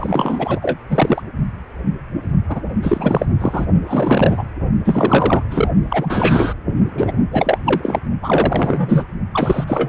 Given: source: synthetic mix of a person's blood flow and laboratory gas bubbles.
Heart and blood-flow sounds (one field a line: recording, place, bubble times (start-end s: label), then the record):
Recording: Doppler ultrasound of blood flow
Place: precordium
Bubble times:
0.00-0.78 s: bubbles
0.90-1.22 s: bubbles
2.48-2.61 s: bubbles
2.82-3.26 s: bubbles
3.40-3.65 s: bubbles
3.86-4.45 s: bubbles
4.84-5.43 s: bubbles
5.50-5.68 s: bubbles
5.89-6.54 s: bubbles
6.97-7.12 s: bubbles
7.31-7.58 s: bubbles
7.64-7.99 s: bubbles
8.22-9.04 s: bubbles
9.31-9.64 s: bubbles
9.67-9.88 s: bubbles
From the record:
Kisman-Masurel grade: 333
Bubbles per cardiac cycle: rolling drumbeat, 9 or more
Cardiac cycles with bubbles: 50 to 99%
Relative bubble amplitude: loud (0.450 to 0.775)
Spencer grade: 3 (all of the cardiac periods contain showers or single bubble signals, but not dominating or overriding the cardiac motion signals)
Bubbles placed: only in the low amplitude regions of the cardiac cycle